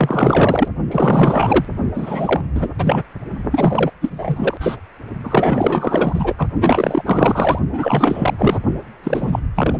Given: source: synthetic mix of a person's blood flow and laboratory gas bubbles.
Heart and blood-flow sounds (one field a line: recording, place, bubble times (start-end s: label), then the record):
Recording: Doppler ultrasound of blood flow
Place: precordium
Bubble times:
0.00-0.69 s: bubbles
0.91-1.65 s: bubbles
1.94-2.41 s: bubbles
2.54-2.69 s: bubbles
2.78-3.02 s: bubbles
3.51-3.91 s: bubbles
4.01-4.58 s: bubbles
4.60-4.76 s: bubbles
5.23-6.47 s: bubbles
6.60-7.02 s: bubbles
7.05-7.59 s: bubbles
7.72-8.33 s: bubbles
8.38-8.59 s: bubbles
9.03-9.39 s: bubbles
9.54-9.80 s: bubbles
From the record:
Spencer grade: 4 (maximum detectable bubble signal sounding continuously throughout systole and diastole of every cardiac period, and overriding the amplitude of the normal cardiac signals)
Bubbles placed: only in the low amplitude regions of the cardiac cycle